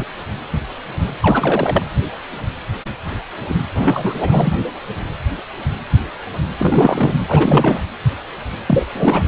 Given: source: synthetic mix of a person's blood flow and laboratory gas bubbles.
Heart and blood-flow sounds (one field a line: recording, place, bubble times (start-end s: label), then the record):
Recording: Doppler ultrasound of blood flow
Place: precordium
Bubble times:
0.00-0.06 s: bubbles
1.22-1.82 s: bubbles
3.48-3.55 s: bubbles
3.74-4.52 s: bubbles
6.58-7.14 s: bubbles
7.27-7.81 s: bubbles
8.66-8.87 s: bubbles
8.92-9.23 s: bubbles
From the record:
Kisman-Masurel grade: 332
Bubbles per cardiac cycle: rolling drumbeat, 9 or more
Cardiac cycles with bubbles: 50 to 99%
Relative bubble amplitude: moderate (0.250 to 0.450)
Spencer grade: 3 (all of the cardiac periods contain showers or single bubble signals, but not dominating or overriding the cardiac motion signals)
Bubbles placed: anywhere in the cardiac cycle